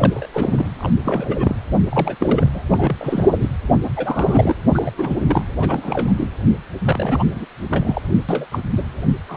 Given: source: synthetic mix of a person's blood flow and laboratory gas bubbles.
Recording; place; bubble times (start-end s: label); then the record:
Doppler ultrasound of blood flow; precordium
0.00-0.26 s: bubbles
0.33-0.69 s: bubbles
0.78-0.90 s: bubbles
1.01-1.56 s: bubbles
1.90-2.16 s: bubbles
2.20-2.48 s: bubbles
2.54-2.64 s: bubbles
2.71-2.96 s: bubbles
2.98-3.50 s: bubbles
3.96-4.55 s: bubbles
4.74-4.91 s: bubbles
4.97-5.15 s: bubbles
5.20-5.45 s: bubbles
5.59-6.26 s: bubbles
6.79-7.46 s: bubbles
7.68-8.02 s: bubbles
8.28-8.46 s: bubbles
8.51-8.60 s: bubbles
8.76-8.83 s: bubbles
9.27-9.37 s: bubbles
From the record:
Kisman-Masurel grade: 342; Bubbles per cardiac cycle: rolling drumbeat, 9 or more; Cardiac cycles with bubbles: 100%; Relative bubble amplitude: moderate (0.250 to 0.450); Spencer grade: 3 (all of the cardiac periods contain showers or single bubble signals, but not dominating or overriding the cardiac motion signals); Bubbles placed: anywhere in the cardiac cycle